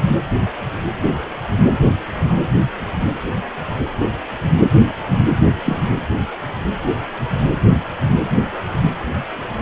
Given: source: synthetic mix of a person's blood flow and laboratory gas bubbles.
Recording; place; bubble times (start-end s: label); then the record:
Doppler ultrasound of blood flow; precordium
1.02-1.16 s: bubbles
5.65-5.79 s: bubbles
From the record:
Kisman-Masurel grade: 113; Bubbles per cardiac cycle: 1 to 2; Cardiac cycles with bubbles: 1 to 10%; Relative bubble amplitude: loud (0.450 to 0.775); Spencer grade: 1 (occasional bubble signal discernible with the cardiac motion signal, with majority of cardiac periods free of bubbles); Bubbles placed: anywhere in the cardiac cycle